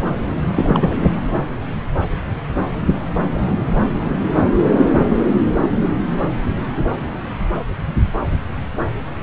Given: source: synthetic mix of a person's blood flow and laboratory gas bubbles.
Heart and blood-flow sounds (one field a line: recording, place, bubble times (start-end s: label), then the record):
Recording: Doppler ultrasound of blood flow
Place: subclavian vein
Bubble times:
0.56-0.96 s: bubbles
From the record:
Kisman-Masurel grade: 212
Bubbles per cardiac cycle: several, 3 to 8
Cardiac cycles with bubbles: 1 to 10%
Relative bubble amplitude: moderate (0.250 to 0.450)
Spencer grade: 1 (occasional bubble signal discernible with the cardiac motion signal, with majority of cardiac periods free of bubbles)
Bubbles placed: anywhere in the cardiac cycle